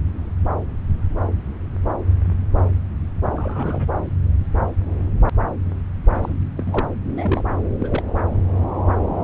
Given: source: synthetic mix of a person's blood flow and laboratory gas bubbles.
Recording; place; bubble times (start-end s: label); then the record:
Doppler ultrasound of blood flow; subclavian vein
3.36-3.89 s: bubbles
6.09-6.33 s: bubbles
6.57-6.87 s: bubbles
7.13-7.42 s: bubbles
7.79-8.03 s: bubbles
From the record:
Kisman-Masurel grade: 221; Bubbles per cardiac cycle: several, 3 to 8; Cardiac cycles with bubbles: 10 to 50%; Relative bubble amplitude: barely perceptible (0.100 to 0.250); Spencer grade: 2 (many but less than half of the cardiac periods contain bubble signals, singularly or in groups); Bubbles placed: anywhere in the cardiac cycle